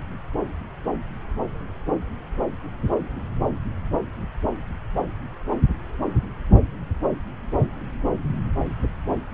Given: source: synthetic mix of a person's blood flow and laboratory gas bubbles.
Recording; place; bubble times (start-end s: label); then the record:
Doppler ultrasound of blood flow; subclavian vein
no bubbles
From the record:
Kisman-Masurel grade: 000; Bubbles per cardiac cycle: 0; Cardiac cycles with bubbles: 0%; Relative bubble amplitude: no bubbles discernible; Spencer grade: 0 (complete lack of bubble signals)